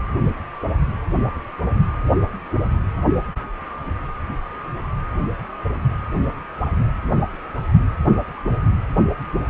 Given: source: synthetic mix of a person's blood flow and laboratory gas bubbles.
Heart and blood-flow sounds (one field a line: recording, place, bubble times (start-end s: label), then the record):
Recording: Doppler ultrasound of blood flow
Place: precordium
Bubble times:
no bubbles
From the record:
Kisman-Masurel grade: 000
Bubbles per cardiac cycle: 0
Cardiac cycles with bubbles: 0%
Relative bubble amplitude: no bubbles discernible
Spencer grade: 0 (complete lack of bubble signals)